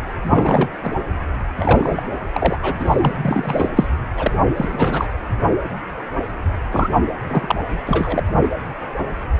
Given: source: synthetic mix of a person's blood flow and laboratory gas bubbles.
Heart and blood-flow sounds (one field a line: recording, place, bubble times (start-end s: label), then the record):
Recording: Doppler ultrasound of blood flow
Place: precordium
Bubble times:
0.23-0.70 s: bubbles
0.82-0.95 s: bubbles
1.58-2.03 s: bubbles
2.32-2.57 s: bubbles
2.61-2.75 s: bubbles
2.79-3.70 s: bubbles
3.75-3.87 s: bubbles
4.17-4.31 s: bubbles
4.56-5.07 s: bubbles
6.71-6.89 s: bubbles
7.28-7.55 s: bubbles
7.85-8.23 s: bubbles
From the record:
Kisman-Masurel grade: 333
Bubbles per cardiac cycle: rolling drumbeat, 9 or more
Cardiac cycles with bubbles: 50 to 99%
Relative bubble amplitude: loud (0.450 to 0.775)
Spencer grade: 3 (all of the cardiac periods contain showers or single bubble signals, but not dominating or overriding the cardiac motion signals)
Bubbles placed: anywhere in the cardiac cycle